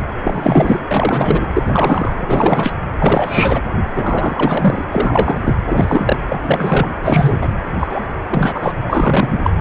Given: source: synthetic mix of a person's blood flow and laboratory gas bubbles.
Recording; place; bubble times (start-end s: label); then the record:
Doppler ultrasound of blood flow; precordium
0.00-0.08 s: bubbles
0.23-0.81 s: bubbles
0.87-1.48 s: bubbles
1.54-1.62 s: bubbles
1.65-2.16 s: bubbles
2.19-2.71 s: bubbles
3.00-3.62 s: bubbles
3.93-4.84 s: bubbles
4.92-5.39 s: bubbles
5.44-5.54 s: bubbles
5.68-6.17 s: bubbles
6.29-6.93 s: bubbles
7.03-7.46 s: bubbles
7.79-8.00 s: bubbles
8.29-8.72 s: bubbles
8.88-9.51 s: bubbles
9.59-9.61 s: bubbles
From the record:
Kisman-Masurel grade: 343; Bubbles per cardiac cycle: rolling drumbeat, 9 or more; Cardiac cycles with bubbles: 100%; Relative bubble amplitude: loud (0.450 to 0.775); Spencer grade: 3 (all of the cardiac periods contain showers or single bubble signals, but not dominating or overriding the cardiac motion signals); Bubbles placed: anywhere in the cardiac cycle